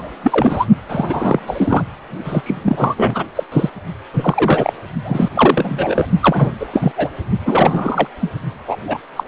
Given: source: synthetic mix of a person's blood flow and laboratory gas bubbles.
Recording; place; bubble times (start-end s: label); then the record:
Doppler ultrasound of blood flow; precordium
0.00-0.10 s: bubbles
0.24-0.66 s: bubbles
0.87-1.40 s: bubbles
1.47-1.83 s: bubbles
2.24-3.23 s: bubbles
3.35-3.44 s: bubbles
3.52-3.70 s: bubbles
4.13-4.73 s: bubbles
5.04-5.30 s: bubbles
5.34-6.07 s: bubbles
6.21-6.56 s: bubbles
6.60-6.67 s: bubbles
6.72-6.92 s: bubbles
6.96-7.08 s: bubbles
7.46-8.07 s: bubbles
8.21-8.30 s: bubbles
8.68-8.77 s: bubbles
8.87-8.97 s: bubbles
9.16-9.24 s: bubbles
From the record:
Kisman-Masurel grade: 333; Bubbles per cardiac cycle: rolling drumbeat, 9 or more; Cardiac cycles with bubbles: 50 to 99%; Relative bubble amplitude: loud (0.450 to 0.775); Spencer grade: 3 (all of the cardiac periods contain showers or single bubble signals, but not dominating or overriding the cardiac motion signals); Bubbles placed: only in the low amplitude regions of the cardiac cycle